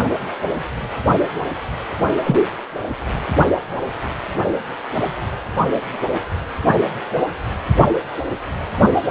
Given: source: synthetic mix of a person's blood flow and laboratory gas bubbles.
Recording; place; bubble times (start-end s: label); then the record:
Doppler ultrasound of blood flow; precordium
2.23-2.38 s: bubbles
From the record:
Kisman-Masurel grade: 113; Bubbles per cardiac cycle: 1 to 2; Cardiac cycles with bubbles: 1 to 10%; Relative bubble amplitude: loud (0.450 to 0.775); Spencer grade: 1 (occasional bubble signal discernible with the cardiac motion signal, with majority of cardiac periods free of bubbles); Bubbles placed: only in the low amplitude regions of the cardiac cycle